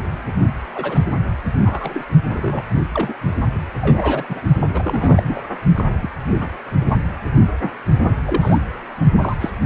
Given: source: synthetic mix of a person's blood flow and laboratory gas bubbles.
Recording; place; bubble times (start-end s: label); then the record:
Doppler ultrasound of blood flow; precordium
0.75-1.02 s: bubbles
1.64-2.04 s: bubbles
2.30-2.64 s: bubbles
2.94-3.15 s: bubbles
3.81-4.41 s: bubbles
4.74-5.41 s: bubbles
5.75-5.84 s: bubbles
6.01-6.10 s: bubbles
6.39-6.48 s: bubbles
6.81-6.95 s: bubbles
7.60-7.71 s: bubbles
8.26-8.59 s: bubbles
9.21-9.37 s: bubbles
9.40-9.51 s: bubbles
From the record:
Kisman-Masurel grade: 232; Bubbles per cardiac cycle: several, 3 to 8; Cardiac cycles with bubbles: 50 to 99%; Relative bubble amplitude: moderate (0.250 to 0.450); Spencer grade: 3 (all of the cardiac periods contain showers or single bubble signals, but not dominating or overriding the cardiac motion signals); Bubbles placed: only in the low amplitude regions of the cardiac cycle